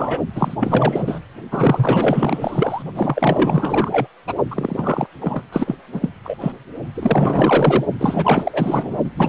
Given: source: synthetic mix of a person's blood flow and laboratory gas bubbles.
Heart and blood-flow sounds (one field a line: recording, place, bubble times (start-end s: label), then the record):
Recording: Doppler ultrasound of blood flow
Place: precordium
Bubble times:
0.00-0.18 s: bubbles
0.35-0.56 s: bubbles
0.59-1.20 s: bubbles
1.51-2.83 s: bubbles
2.95-4.07 s: bubbles
4.27-4.34 s: bubbles
4.50-5.07 s: bubbles
5.20-5.42 s: bubbles
5.52-5.75 s: bubbles
5.92-6.09 s: bubbles
6.23-6.37 s: bubbles
6.40-6.53 s: bubbles
6.94-7.85 s: bubbles
7.98-8.97 s: bubbles
9.04-9.11 s: bubbles
9.16-9.29 s: bubbles
From the record:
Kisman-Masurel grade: 444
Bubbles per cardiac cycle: continuous sound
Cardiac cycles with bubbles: 100%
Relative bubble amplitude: maximal (0.775 to 0.999)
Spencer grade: 4 (maximum detectable bubble signal sounding continuously throughout systole and diastole of every cardiac period, and overriding the amplitude of the normal cardiac signals)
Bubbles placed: only in the low amplitude regions of the cardiac cycle